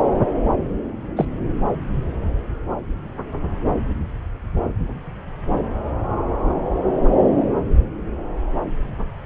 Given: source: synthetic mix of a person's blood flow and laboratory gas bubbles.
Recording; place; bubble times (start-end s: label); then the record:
Doppler ultrasound of blood flow; subclavian vein
1.16-1.25 s: bubbles
From the record:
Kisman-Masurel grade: 113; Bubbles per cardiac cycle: 1 to 2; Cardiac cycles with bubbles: 1 to 10%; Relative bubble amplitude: loud (0.450 to 0.775); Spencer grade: 1 (occasional bubble signal discernible with the cardiac motion signal, with majority of cardiac periods free of bubbles); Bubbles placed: anywhere in the cardiac cycle